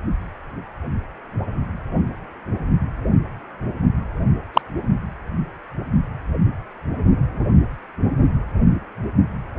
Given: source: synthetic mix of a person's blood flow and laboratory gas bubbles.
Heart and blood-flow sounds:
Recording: Doppler ultrasound of blood flow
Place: precordium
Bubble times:
4.54-4.62 s: bubbles
From the record:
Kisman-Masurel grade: 113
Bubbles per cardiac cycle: 1 to 2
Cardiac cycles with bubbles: 1 to 10%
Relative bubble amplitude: loud (0.450 to 0.775)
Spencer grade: 1 (occasional bubble signal discernible with the cardiac motion signal, with majority of cardiac periods free of bubbles)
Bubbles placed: only in the low amplitude regions of the cardiac cycle

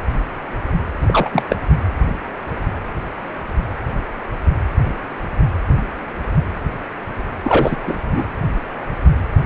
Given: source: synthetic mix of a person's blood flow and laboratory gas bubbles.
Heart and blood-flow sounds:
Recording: Doppler ultrasound of blood flow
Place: precordium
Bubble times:
1.06-1.30 s: bubbles
1.33-1.45 s: bubbles
1.49-1.56 s: bubbles
7.44-7.77 s: bubbles
7.83-8.25 s: bubbles
From the record:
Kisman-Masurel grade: 223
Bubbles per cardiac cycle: several, 3 to 8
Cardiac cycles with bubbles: 10 to 50%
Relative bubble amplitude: loud (0.450 to 0.775)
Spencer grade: 2 (many but less than half of the cardiac periods contain bubble signals, singularly or in groups)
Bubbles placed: anywhere in the cardiac cycle

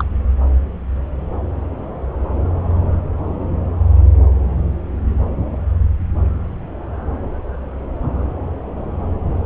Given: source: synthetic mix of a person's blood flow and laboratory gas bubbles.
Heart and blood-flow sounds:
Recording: Doppler ultrasound of blood flow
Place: subclavian vein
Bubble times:
0.00-0.04 s: bubbles
From the record:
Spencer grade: 1 (occasional bubble signal discernible with the cardiac motion signal, with majority of cardiac periods free of bubbles)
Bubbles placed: anywhere in the cardiac cycle

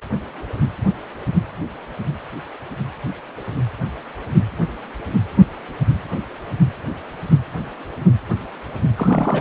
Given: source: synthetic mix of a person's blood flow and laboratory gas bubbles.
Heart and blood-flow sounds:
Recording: Doppler ultrasound of blood flow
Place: precordium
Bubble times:
8.96-9.41 s: bubbles
From the record:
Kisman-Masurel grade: 212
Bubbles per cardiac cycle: several, 3 to 8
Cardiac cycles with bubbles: 1 to 10%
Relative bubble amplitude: moderate (0.250 to 0.450)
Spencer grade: 1 (occasional bubble signal discernible with the cardiac motion signal, with majority of cardiac periods free of bubbles)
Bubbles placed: anywhere in the cardiac cycle

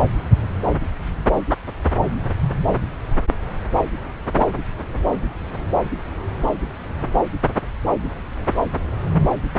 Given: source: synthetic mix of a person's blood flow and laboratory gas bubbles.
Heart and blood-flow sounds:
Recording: Doppler ultrasound of blood flow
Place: subclavian vein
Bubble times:
no bubbles
From the record:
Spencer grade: 0 (complete lack of bubble signals)

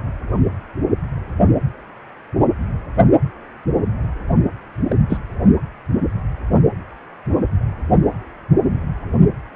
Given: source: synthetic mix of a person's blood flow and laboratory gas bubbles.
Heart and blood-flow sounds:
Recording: Doppler ultrasound of blood flow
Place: precordium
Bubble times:
4.89-4.96 s: bubbles
5.10-5.18 s: bubbles
From the record:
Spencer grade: 1 (occasional bubble signal discernible with the cardiac motion signal, with majority of cardiac periods free of bubbles)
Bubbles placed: only in the low amplitude regions of the cardiac cycle

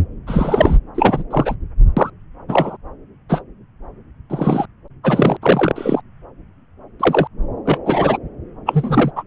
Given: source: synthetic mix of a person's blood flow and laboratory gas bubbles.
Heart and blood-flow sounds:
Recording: Doppler ultrasound of blood flow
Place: subclavian vein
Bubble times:
0.27-0.78 s: bubbles
0.95-1.24 s: bubbles
1.30-1.55 s: bubbles
1.96-2.10 s: bubbles
2.48-2.77 s: bubbles
3.29-3.42 s: bubbles
4.29-4.66 s: bubbles
5.04-5.37 s: bubbles
5.42-5.71 s: bubbles
5.75-6.01 s: bubbles
7.00-7.28 s: bubbles
7.65-7.78 s: bubbles
7.86-8.18 s: bubbles
8.65-9.11 s: bubbles
9.16-9.23 s: bubbles
From the record:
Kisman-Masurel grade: 243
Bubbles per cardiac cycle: several, 3 to 8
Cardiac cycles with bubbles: 100%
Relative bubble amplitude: loud (0.450 to 0.775)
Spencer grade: 3 (all of the cardiac periods contain showers or single bubble signals, but not dominating or overriding the cardiac motion signals)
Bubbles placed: anywhere in the cardiac cycle

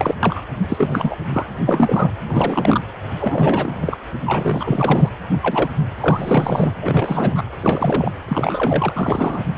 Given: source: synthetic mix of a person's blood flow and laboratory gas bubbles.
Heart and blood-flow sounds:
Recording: Doppler ultrasound of blood flow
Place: precordium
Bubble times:
0.00-0.15 s: bubbles
0.20-0.41 s: bubbles
0.69-1.16 s: bubbles
1.29-1.46 s: bubbles
1.66-2.12 s: bubbles
2.29-2.79 s: bubbles
3.20-3.97 s: bubbles
4.26-5.09 s: bubbles
5.33-5.38 s: bubbles
5.42-5.70 s: bubbles
5.96-6.75 s: bubbles
6.82-7.43 s: bubbles
7.62-8.13 s: bubbles
8.28-9.45 s: bubbles
From the record:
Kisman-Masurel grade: 343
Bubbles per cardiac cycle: rolling drumbeat, 9 or more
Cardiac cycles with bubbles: 100%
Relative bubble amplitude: loud (0.450 to 0.775)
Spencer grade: 3 (all of the cardiac periods contain showers or single bubble signals, but not dominating or overriding the cardiac motion signals)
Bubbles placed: anywhere in the cardiac cycle

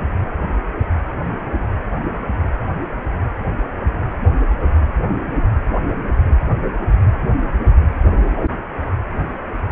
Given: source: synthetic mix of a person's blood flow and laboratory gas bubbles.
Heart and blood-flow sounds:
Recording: Doppler ultrasound of blood flow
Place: precordium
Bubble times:
no bubbles
From the record:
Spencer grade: 0 (complete lack of bubble signals)

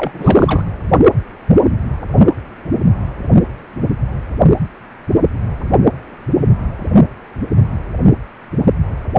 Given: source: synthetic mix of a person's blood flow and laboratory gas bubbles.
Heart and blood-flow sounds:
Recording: Doppler ultrasound of blood flow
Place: precordium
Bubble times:
0.00-0.72 s: bubbles
From the record:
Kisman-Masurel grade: 213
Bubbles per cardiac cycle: several, 3 to 8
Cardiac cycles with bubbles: 1 to 10%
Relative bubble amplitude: loud (0.450 to 0.775)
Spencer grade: 1 (occasional bubble signal discernible with the cardiac motion signal, with majority of cardiac periods free of bubbles)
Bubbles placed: only in the low amplitude regions of the cardiac cycle

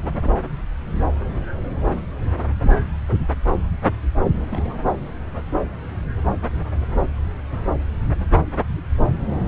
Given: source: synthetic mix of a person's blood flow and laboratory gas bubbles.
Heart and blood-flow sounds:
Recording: Doppler ultrasound of blood flow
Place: subclavian vein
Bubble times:
0.00-0.34 s: bubbles
4.18-4.44 s: bubbles
4.50-4.81 s: bubbles
From the record:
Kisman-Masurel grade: 221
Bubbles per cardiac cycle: several, 3 to 8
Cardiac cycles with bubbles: 10 to 50%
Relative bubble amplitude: barely perceptible (0.100 to 0.250)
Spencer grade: 2 (many but less than half of the cardiac periods contain bubble signals, singularly or in groups)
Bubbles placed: anywhere in the cardiac cycle

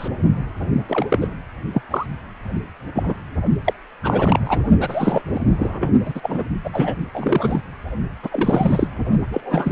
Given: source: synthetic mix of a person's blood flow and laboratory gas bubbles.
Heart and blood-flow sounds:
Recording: Doppler ultrasound of blood flow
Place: precordium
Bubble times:
0.00-0.08 s: bubbles
0.88-1.07 s: bubbles
1.10-1.19 s: bubbles
1.21-1.27 s: bubbles
1.73-1.82 s: bubbles
1.90-2.06 s: bubbles
2.94-3.15 s: bubbles
3.65-3.73 s: bubbles
4.03-4.61 s: bubbles
4.79-5.22 s: bubbles
5.33-5.91 s: bubbles
6.05-6.45 s: bubbles
6.64-6.70 s: bubbles
6.73-6.98 s: bubbles
7.14-7.62 s: bubbles
8.23-8.87 s: bubbles
9.30-9.72 s: bubbles
From the record:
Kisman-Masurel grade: 242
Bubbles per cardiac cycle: several, 3 to 8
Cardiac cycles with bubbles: 100%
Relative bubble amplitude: moderate (0.250 to 0.450)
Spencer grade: 3 (all of the cardiac periods contain showers or single bubble signals, but not dominating or overriding the cardiac motion signals)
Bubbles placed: only in the low amplitude regions of the cardiac cycle

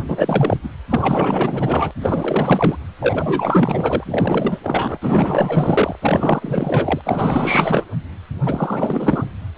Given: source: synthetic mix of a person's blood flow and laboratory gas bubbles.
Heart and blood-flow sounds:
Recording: Doppler ultrasound of blood flow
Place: precordium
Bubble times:
0.05-0.57 s: bubbles
0.63-0.69 s: bubbles
0.89-1.91 s: bubbles
2.02-2.77 s: bubbles
2.99-4.58 s: bubbles
4.63-4.99 s: bubbles
5.01-5.96 s: bubbles
6.01-7.01 s: bubbles
7.04-7.86 s: bubbles
8.44-9.24 s: bubbles
From the record:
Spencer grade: 4 (maximum detectable bubble signal sounding continuously throughout systole and diastole of every cardiac period, and overriding the amplitude of the normal cardiac signals)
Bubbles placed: anywhere in the cardiac cycle

